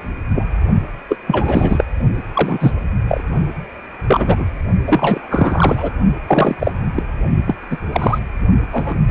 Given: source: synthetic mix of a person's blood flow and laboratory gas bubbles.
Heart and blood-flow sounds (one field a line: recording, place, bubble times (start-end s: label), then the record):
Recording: Doppler ultrasound of blood flow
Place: precordium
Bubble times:
0.34-0.45 s: bubbles
1.08-1.17 s: bubbles
1.27-1.84 s: bubbles
2.33-2.73 s: bubbles
3.08-3.21 s: bubbles
4.08-4.44 s: bubbles
4.87-5.21 s: bubbles
5.30-5.90 s: bubbles
6.28-6.54 s: bubbles
6.59-6.71 s: bubbles
6.95-7.03 s: bubbles
7.46-7.55 s: bubbles
7.70-7.77 s: bubbles
7.92-8.18 s: bubbles
8.72-8.95 s: bubbles
9.08-9.11 s: bubbles
From the record:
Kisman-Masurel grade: 243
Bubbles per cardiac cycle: several, 3 to 8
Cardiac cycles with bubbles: 100%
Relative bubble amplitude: loud (0.450 to 0.775)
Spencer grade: 3 (all of the cardiac periods contain showers or single bubble signals, but not dominating or overriding the cardiac motion signals)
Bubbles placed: only in the low amplitude regions of the cardiac cycle